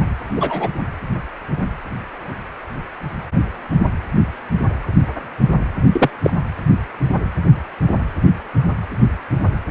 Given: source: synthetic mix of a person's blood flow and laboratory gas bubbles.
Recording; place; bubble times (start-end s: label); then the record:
Doppler ultrasound of blood flow; precordium
0.35-0.69 s: bubbles
5.92-6.09 s: bubbles
6.23-6.31 s: bubbles
From the record:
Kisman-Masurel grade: 123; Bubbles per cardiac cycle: 1 to 2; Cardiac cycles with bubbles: 10 to 50%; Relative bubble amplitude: loud (0.450 to 0.775); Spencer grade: 2 (many but less than half of the cardiac periods contain bubble signals, singularly or in groups); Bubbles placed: anywhere in the cardiac cycle